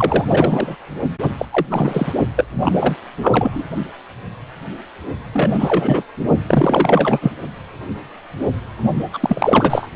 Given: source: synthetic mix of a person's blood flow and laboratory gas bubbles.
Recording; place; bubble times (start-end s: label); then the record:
Doppler ultrasound of blood flow; precordium
0.00-0.24 s: bubbles
0.28-0.77 s: bubbles
1.21-1.33 s: bubbles
1.38-1.46 s: bubbles
1.50-1.66 s: bubbles
1.70-2.14 s: bubbles
2.35-2.45 s: bubbles
2.60-2.96 s: bubbles
3.23-3.64 s: bubbles
5.33-6.03 s: bubbles
6.48-7.32 s: bubbles
9.13-9.89 s: bubbles
From the record:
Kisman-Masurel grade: 333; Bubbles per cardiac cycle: rolling drumbeat, 9 or more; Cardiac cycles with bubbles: 50 to 99%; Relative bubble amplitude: loud (0.450 to 0.775); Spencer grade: 3 (all of the cardiac periods contain showers or single bubble signals, but not dominating or overriding the cardiac motion signals); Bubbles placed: only in the low amplitude regions of the cardiac cycle